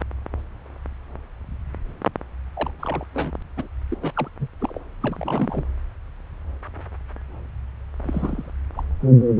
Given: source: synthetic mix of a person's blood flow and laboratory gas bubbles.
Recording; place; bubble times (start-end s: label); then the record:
Doppler ultrasound of blood flow; subclavian vein
2.54-2.70 s: bubbles
2.79-3.05 s: bubbles
3.13-3.31 s: bubbles
3.56-3.67 s: bubbles
3.89-3.97 s: bubbles
4.02-4.12 s: bubbles
4.16-4.29 s: bubbles
4.39-4.47 s: bubbles
4.60-4.80 s: bubbles
5.00-5.63 s: bubbles
8.03-8.50 s: bubbles
8.75-8.83 s: bubbles
From the record:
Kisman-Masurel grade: 221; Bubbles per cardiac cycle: several, 3 to 8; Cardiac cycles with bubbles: 10 to 50%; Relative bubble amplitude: barely perceptible (0.100 to 0.250); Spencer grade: 2 (many but less than half of the cardiac periods contain bubble signals, singularly or in groups); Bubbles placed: anywhere in the cardiac cycle